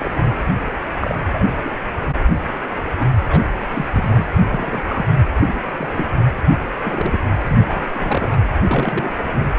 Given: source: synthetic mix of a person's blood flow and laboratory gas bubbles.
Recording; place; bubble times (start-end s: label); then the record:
Doppler ultrasound of blood flow; precordium
0.00-0.22 s: bubbles
0.46-0.54 s: bubbles
1.01-1.15 s: bubbles
1.33-1.44 s: bubbles
1.65-1.70 s: bubbles
3.00-3.06 s: bubbles
3.28-3.43 s: bubbles
3.70-3.85 s: bubbles
3.92-4.26 s: bubbles
4.39-4.82 s: bubbles
4.87-5.06 s: bubbles
5.46-5.61 s: bubbles
5.68-5.71 s: bubbles
5.79-5.87 s: bubbles
5.92-6.05 s: bubbles
6.84-7.18 s: bubbles
7.48-7.90 s: bubbles
7.92-8.37 s: bubbles
8.61-9.12 s: bubbles
From the record:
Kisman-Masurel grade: 242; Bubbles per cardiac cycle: several, 3 to 8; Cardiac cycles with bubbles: 100%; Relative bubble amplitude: moderate (0.250 to 0.450); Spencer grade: 3 (all of the cardiac periods contain showers or single bubble signals, but not dominating or overriding the cardiac motion signals); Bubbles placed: anywhere in the cardiac cycle